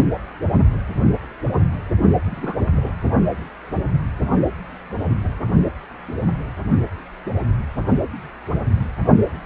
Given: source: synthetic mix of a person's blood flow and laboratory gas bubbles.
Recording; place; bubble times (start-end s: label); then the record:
Doppler ultrasound of blood flow; precordium
2.02-2.10 s: bubbles
2.25-2.56 s: bubbles
2.75-2.92 s: bubbles
From the record:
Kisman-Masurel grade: 221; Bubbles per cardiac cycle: several, 3 to 8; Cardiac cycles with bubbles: 10 to 50%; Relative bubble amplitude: barely perceptible (0.100 to 0.250); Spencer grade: 2 (many but less than half of the cardiac periods contain bubble signals, singularly or in groups); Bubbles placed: anywhere in the cardiac cycle